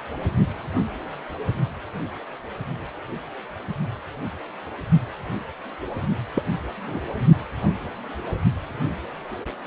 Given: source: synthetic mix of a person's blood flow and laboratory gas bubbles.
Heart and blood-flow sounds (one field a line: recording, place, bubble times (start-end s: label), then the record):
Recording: Doppler ultrasound of blood flow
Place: precordium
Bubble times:
6.34-6.42 s: bubbles
6.87-7.00 s: bubbles
From the record:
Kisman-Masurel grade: 111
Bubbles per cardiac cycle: 1 to 2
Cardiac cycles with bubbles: 1 to 10%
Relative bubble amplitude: barely perceptible (0.100 to 0.250)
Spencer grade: 1 (occasional bubble signal discernible with the cardiac motion signal, with majority of cardiac periods free of bubbles)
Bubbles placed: only in the low amplitude regions of the cardiac cycle